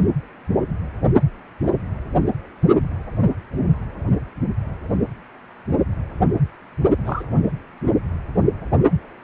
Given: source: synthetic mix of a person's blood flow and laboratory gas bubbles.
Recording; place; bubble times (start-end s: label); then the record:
Doppler ultrasound of blood flow; precordium
7.04-7.25 s: bubbles
From the record:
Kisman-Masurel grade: 112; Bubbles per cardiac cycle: 1 to 2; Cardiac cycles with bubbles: 1 to 10%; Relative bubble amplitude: moderate (0.250 to 0.450); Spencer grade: 1 (occasional bubble signal discernible with the cardiac motion signal, with majority of cardiac periods free of bubbles); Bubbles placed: anywhere in the cardiac cycle